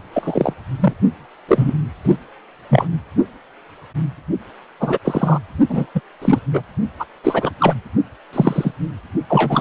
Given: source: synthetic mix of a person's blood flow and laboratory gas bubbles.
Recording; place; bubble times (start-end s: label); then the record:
Doppler ultrasound of blood flow; precordium
0.13-0.54 s: bubbles
0.79-0.93 s: bubbles
1.48-1.72 s: bubbles
2.04-2.17 s: bubbles
2.69-2.87 s: bubbles
4.80-4.98 s: bubbles
5.04-5.39 s: bubbles
5.68-5.86 s: bubbles
5.95-6.00 s: bubbles
6.21-6.39 s: bubbles
6.53-6.62 s: bubbles
6.99-7.05 s: bubbles
7.24-7.51 s: bubbles
7.58-7.74 s: bubbles
8.33-8.72 s: bubbles
9.29-9.61 s: bubbles
From the record:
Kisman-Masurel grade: 243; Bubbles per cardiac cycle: several, 3 to 8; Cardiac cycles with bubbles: 100%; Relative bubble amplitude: loud (0.450 to 0.775); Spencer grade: 3 (all of the cardiac periods contain showers or single bubble signals, but not dominating or overriding the cardiac motion signals); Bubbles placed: only in the low amplitude regions of the cardiac cycle